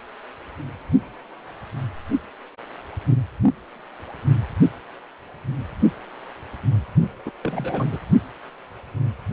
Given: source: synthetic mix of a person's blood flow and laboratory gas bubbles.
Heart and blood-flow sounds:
Doppler ultrasound of blood flow; precordium
7.25-7.30 s: bubbles
7.43-7.88 s: bubbles
7.92-7.98 s: bubbles
From the record:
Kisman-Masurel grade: 211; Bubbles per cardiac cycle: several, 3 to 8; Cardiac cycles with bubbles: 1 to 10%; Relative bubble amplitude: barely perceptible (0.100 to 0.250); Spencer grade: 1 (occasional bubble signal discernible with the cardiac motion signal, with majority of cardiac periods free of bubbles); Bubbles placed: only in the low amplitude regions of the cardiac cycle

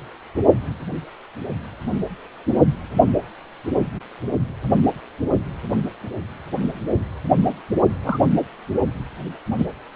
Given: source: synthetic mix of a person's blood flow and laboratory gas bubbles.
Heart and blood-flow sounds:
Doppler ultrasound of blood flow; precordium
7.75-7.80 s: bubbles
8.03-8.19 s: bubbles
9.58-9.67 s: bubbles
9.92-9.96 s: bubbles
From the record:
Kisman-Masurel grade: 122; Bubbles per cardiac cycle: 1 to 2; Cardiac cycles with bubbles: 10 to 50%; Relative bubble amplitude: moderate (0.250 to 0.450); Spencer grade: 2 (many but less than half of the cardiac periods contain bubble signals, singularly or in groups); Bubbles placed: only in the low amplitude regions of the cardiac cycle

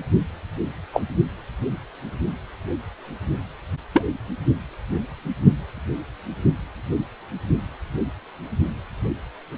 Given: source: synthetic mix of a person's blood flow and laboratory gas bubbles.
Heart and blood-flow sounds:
Doppler ultrasound of blood flow; precordium
0.93-1.03 s: bubbles
3.93-4.04 s: bubbles
From the record:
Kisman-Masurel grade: 123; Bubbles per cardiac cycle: 1 to 2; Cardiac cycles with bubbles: 10 to 50%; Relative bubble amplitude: loud (0.450 to 0.775); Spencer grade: 2 (many but less than half of the cardiac periods contain bubble signals, singularly or in groups); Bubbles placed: only in the low amplitude regions of the cardiac cycle

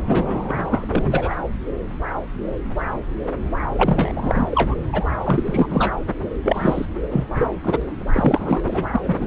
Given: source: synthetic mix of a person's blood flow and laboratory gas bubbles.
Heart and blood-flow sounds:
Doppler ultrasound of blood flow; subclavian vein
0.07-1.36 s: bubbles
3.75-4.75 s: bubbles
4.85-5.06 s: bubbles
5.24-5.93 s: bubbles
6.43-6.85 s: bubbles
7.10-7.25 s: bubbles
7.34-7.48 s: bubbles
7.63-7.82 s: bubbles
8.13-8.84 s: bubbles
8.92-9.00 s: bubbles
9.03-9.27 s: bubbles
From the record:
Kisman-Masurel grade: 333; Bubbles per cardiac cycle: rolling drumbeat, 9 or more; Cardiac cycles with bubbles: 50 to 99%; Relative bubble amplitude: loud (0.450 to 0.775); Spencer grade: 3 (all of the cardiac periods contain showers or single bubble signals, but not dominating or overriding the cardiac motion signals); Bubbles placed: anywhere in the cardiac cycle

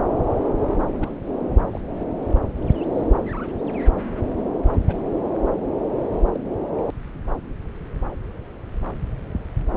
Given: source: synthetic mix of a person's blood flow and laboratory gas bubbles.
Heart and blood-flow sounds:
Doppler ultrasound of blood flow; subclavian vein
0.41-0.49 s: bubbles
0.93-1.18 s: bubbles
1.70-1.81 s: bubbles
4.88-4.96 s: bubbles
6.33-6.41 s: bubbles
From the record:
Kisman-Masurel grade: 121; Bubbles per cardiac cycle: 1 to 2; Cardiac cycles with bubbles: 10 to 50%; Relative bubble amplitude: barely perceptible (0.100 to 0.250); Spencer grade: 2 (many but less than half of the cardiac periods contain bubble signals, singularly or in groups); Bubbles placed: anywhere in the cardiac cycle

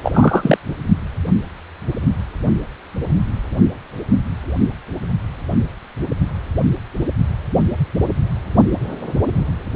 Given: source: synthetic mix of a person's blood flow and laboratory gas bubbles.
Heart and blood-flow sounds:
Doppler ultrasound of blood flow; precordium
0.03-0.57 s: bubbles
From the record:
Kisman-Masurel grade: 213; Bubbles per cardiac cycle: several, 3 to 8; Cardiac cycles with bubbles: 1 to 10%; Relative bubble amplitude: loud (0.450 to 0.775); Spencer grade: 1 (occasional bubble signal discernible with the cardiac motion signal, with majority of cardiac periods free of bubbles); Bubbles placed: anywhere in the cardiac cycle

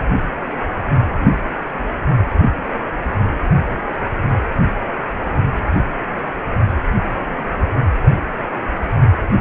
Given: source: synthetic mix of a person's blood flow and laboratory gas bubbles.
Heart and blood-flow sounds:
Doppler ultrasound of blood flow; precordium
7.11-7.44 s: bubbles
From the record:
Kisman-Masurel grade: 111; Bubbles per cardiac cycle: 1 to 2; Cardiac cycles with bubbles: 1 to 10%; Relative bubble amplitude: barely perceptible (0.100 to 0.250); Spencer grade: 1 (occasional bubble signal discernible with the cardiac motion signal, with majority of cardiac periods free of bubbles); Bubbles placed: anywhere in the cardiac cycle

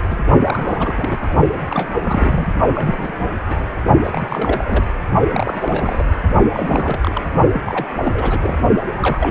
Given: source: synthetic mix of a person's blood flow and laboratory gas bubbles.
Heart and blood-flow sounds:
Doppler ultrasound of blood flow; precordium
0.03-0.07 s: bubbles
0.10-0.17 s: bubbles
0.45-1.35 s: bubbles
1.69-1.90 s: bubbles
2.00-2.45 s: bubbles
2.74-3.32 s: bubbles
3.48-3.81 s: bubbles
4.04-4.84 s: bubbles
5.31-6.05 s: bubbles
6.53-7.25 s: bubbles
7.50-7.87 s: bubbles
8.02-8.58 s: bubbles
8.97-9.31 s: bubbles
From the record:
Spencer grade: 3 (all of the cardiac periods contain showers or single bubble signals, but not dominating or overriding the cardiac motion signals); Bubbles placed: only in the low amplitude regions of the cardiac cycle

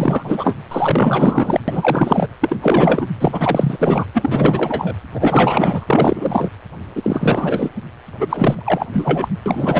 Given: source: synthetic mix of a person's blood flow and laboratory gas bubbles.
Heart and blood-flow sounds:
Doppler ultrasound of blood flow; precordium
0.00-0.55 s: bubbles
0.71-1.60 s: bubbles
1.68-2.27 s: bubbles
2.40-2.56 s: bubbles
2.62-3.08 s: bubbles
3.20-4.04 s: bubbles
4.14-4.94 s: bubbles
5.14-5.86 s: bubbles
5.88-6.49 s: bubbles
6.96-7.70 s: bubbles
8.20-8.86 s: bubbles
8.93-9.28 s: bubbles
9.46-9.79 s: bubbles
From the record:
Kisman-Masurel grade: 444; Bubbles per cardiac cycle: continuous sound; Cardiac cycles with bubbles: 100%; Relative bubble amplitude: maximal (0.775 to 0.999); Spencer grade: 4 (maximum detectable bubble signal sounding continuously throughout systole and diastole of every cardiac period, and overriding the amplitude of the normal cardiac signals); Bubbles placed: anywhere in the cardiac cycle

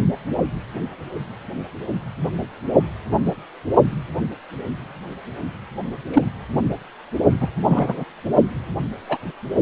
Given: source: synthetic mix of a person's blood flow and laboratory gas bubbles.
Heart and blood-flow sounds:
Doppler ultrasound of blood flow; precordium
6.13-6.23 s: bubbles
7.41-7.48 s: bubbles
7.68-8.04 s: bubbles
9.08-9.17 s: bubbles
From the record:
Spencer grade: 2 (many but less than half of the cardiac periods contain bubble signals, singularly or in groups); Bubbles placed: only in the low amplitude regions of the cardiac cycle

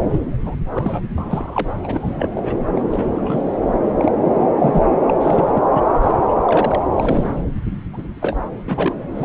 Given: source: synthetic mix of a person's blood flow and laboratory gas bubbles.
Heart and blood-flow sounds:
Doppler ultrasound of blood flow; subclavian vein
0.09-0.21 s: bubbles
0.44-0.56 s: bubbles
0.71-1.03 s: bubbles
1.17-1.71 s: bubbles
1.83-2.28 s: bubbles
2.34-2.61 s: bubbles
2.75-2.81 s: bubbles
2.91-3.56 s: bubbles
3.98-4.12 s: bubbles
4.25-4.48 s: bubbles
4.57-4.86 s: bubbles
5.08-5.14 s: bubbles
5.21-5.62 s: bubbles
5.71-5.83 s: bubbles
6.03-6.20 s: bubbles
6.28-6.40 s: bubbles
6.46-6.82 s: bubbles
6.92-7.42 s: bubbles
7.93-8.09 s: bubbles
8.21-8.37 s: bubbles
8.67-8.97 s: bubbles
9.15-9.25 s: bubbles
From the record:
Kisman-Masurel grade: 242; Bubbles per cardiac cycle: several, 3 to 8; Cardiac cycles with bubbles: 100%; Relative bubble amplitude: moderate (0.250 to 0.450); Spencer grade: 3 (all of the cardiac periods contain showers or single bubble signals, but not dominating or overriding the cardiac motion signals); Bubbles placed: anywhere in the cardiac cycle

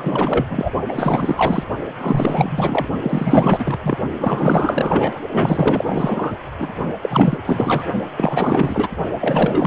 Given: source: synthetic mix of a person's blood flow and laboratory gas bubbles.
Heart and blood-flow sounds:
Doppler ultrasound of blood flow; precordium
0.00-0.46 s: bubbles
0.49-0.72 s: bubbles
0.88-1.63 s: bubbles
2.00-2.89 s: bubbles
3.02-3.79 s: bubbles
3.83-3.98 s: bubbles
4.12-5.21 s: bubbles
5.31-6.38 s: bubbles
6.59-6.72 s: bubbles
7.02-7.38 s: bubbles
7.46-7.84 s: bubbles
8.17-8.88 s: bubbles
9.21-9.67 s: bubbles
From the record:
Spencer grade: 4 (maximum detectable bubble signal sounding continuously throughout systole and diastole of every cardiac period, and overriding the amplitude of the normal cardiac signals); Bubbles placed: only in the low amplitude regions of the cardiac cycle

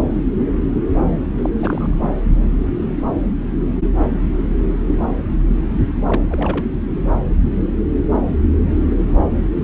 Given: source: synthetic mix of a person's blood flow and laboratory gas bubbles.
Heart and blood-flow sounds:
Doppler ultrasound of blood flow; subclavian vein
1.38-1.50 s: bubbles
1.62-1.99 s: bubbles
2.01-2.09 s: bubbles
6.08-6.22 s: bubbles
6.29-6.66 s: bubbles
From the record:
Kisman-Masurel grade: 222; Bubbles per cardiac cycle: several, 3 to 8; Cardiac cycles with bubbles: 10 to 50%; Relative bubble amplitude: moderate (0.250 to 0.450); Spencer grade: 2 (many but less than half of the cardiac periods contain bubble signals, singularly or in groups); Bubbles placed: anywhere in the cardiac cycle

